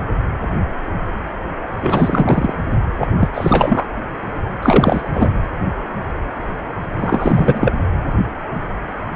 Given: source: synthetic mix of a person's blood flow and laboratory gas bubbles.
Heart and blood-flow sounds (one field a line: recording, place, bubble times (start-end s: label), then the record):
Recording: Doppler ultrasound of blood flow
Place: precordium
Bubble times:
1.82-2.53 s: bubbles
3.00-3.07 s: bubbles
3.19-3.29 s: bubbles
3.34-3.88 s: bubbles
4.62-5.29 s: bubbles
6.96-7.73 s: bubbles
From the record:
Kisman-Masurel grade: 333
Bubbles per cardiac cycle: rolling drumbeat, 9 or more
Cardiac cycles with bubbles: 50 to 99%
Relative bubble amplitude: loud (0.450 to 0.775)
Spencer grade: 3 (all of the cardiac periods contain showers or single bubble signals, but not dominating or overriding the cardiac motion signals)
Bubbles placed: anywhere in the cardiac cycle